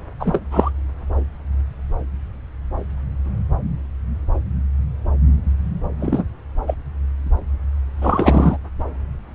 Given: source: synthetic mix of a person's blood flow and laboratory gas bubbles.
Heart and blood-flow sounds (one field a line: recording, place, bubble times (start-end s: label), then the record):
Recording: Doppler ultrasound of blood flow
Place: subclavian vein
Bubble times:
0.20-0.40 s: bubbles
0.51-0.70 s: bubbles
6.00-6.24 s: bubbles
6.67-6.75 s: bubbles
8.01-8.58 s: bubbles
From the record:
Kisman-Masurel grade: 223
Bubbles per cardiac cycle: several, 3 to 8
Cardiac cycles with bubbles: 10 to 50%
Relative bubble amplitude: loud (0.450 to 0.775)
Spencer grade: 2 (many but less than half of the cardiac periods contain bubble signals, singularly or in groups)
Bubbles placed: anywhere in the cardiac cycle